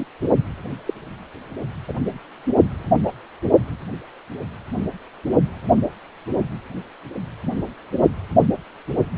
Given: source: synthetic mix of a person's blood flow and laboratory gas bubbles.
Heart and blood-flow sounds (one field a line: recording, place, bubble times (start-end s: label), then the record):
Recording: Doppler ultrasound of blood flow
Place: precordium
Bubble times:
0.00-0.07 s: bubbles
0.85-0.94 s: bubbles
1.88-1.93 s: bubbles
3.03-3.12 s: bubbles
From the record:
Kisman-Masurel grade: 122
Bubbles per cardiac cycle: 1 to 2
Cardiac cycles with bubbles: 10 to 50%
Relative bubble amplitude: moderate (0.250 to 0.450)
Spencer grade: 2 (many but less than half of the cardiac periods contain bubble signals, singularly or in groups)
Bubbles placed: only in the low amplitude regions of the cardiac cycle